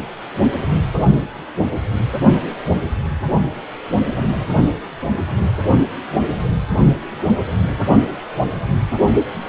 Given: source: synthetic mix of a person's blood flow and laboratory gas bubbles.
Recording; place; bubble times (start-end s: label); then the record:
Doppler ultrasound of blood flow; precordium
4.15-4.28 s: bubbles
From the record:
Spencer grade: 2 (many but less than half of the cardiac periods contain bubble signals, singularly or in groups); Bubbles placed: only in the low amplitude regions of the cardiac cycle